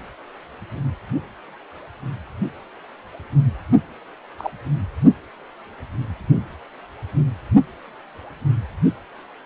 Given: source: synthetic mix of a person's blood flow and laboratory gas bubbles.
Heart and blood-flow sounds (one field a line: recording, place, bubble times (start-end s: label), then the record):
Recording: Doppler ultrasound of blood flow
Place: precordium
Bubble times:
4.38-4.50 s: bubbles
From the record:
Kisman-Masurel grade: 122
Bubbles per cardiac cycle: 1 to 2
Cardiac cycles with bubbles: 10 to 50%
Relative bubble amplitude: moderate (0.250 to 0.450)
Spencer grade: 2 (many but less than half of the cardiac periods contain bubble signals, singularly or in groups)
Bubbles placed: anywhere in the cardiac cycle